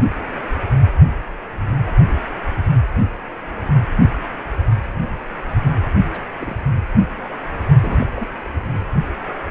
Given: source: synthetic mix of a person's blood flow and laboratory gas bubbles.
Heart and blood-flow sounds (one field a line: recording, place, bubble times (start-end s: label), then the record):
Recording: Doppler ultrasound of blood flow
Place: precordium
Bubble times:
6.13-6.20 s: bubbles
6.40-6.62 s: bubbles
7.80-8.06 s: bubbles
8.16-8.28 s: bubbles
8.44-8.49 s: bubbles
From the record:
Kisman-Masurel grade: 221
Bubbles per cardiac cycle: several, 3 to 8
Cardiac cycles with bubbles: 10 to 50%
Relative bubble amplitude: barely perceptible (0.100 to 0.250)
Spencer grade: 2 (many but less than half of the cardiac periods contain bubble signals, singularly or in groups)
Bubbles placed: only in the low amplitude regions of the cardiac cycle